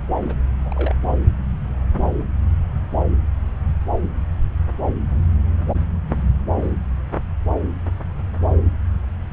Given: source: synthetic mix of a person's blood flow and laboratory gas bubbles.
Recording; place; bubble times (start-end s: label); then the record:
Doppler ultrasound of blood flow; subclavian vein
0.15-0.34 s: bubbles
0.62-0.95 s: bubbles
From the record:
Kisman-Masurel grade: 211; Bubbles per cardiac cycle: several, 3 to 8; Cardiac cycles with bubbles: 1 to 10%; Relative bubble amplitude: barely perceptible (0.100 to 0.250); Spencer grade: 1 (occasional bubble signal discernible with the cardiac motion signal, with majority of cardiac periods free of bubbles); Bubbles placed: anywhere in the cardiac cycle